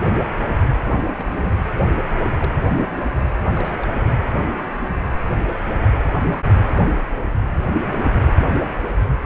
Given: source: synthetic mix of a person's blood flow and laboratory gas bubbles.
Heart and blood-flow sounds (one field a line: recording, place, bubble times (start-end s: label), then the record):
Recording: Doppler ultrasound of blood flow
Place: precordium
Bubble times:
1.13-1.52 s: bubbles
2.38-2.52 s: bubbles
2.97-3.01 s: bubbles
3.56-3.89 s: bubbles
From the record:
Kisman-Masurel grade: 121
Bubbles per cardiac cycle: 1 to 2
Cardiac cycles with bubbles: 10 to 50%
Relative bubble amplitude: barely perceptible (0.100 to 0.250)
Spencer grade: 2 (many but less than half of the cardiac periods contain bubble signals, singularly or in groups)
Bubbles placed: anywhere in the cardiac cycle